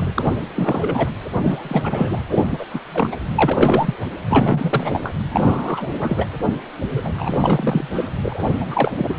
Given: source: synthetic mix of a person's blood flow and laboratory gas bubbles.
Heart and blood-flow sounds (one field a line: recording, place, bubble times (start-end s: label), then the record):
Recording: Doppler ultrasound of blood flow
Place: precordium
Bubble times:
0.00-0.14 s: bubbles
0.16-0.33 s: bubbles
0.55-1.10 s: bubbles
1.32-2.23 s: bubbles
2.29-2.66 s: bubbles
2.73-2.80 s: bubbles
2.94-3.17 s: bubbles
3.38-3.95 s: bubbles
4.29-5.14 s: bubbles
5.32-5.90 s: bubbles
6.00-6.26 s: bubbles
6.88-7.12 s: bubbles
7.17-7.88 s: bubbles
7.93-8.09 s: bubbles
8.22-8.48 s: bubbles
8.60-8.95 s: bubbles
8.97-9.17 s: bubbles
From the record:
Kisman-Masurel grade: 343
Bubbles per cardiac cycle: rolling drumbeat, 9 or more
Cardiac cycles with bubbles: 100%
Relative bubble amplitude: loud (0.450 to 0.775)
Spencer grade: 3 (all of the cardiac periods contain showers or single bubble signals, but not dominating or overriding the cardiac motion signals)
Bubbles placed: anywhere in the cardiac cycle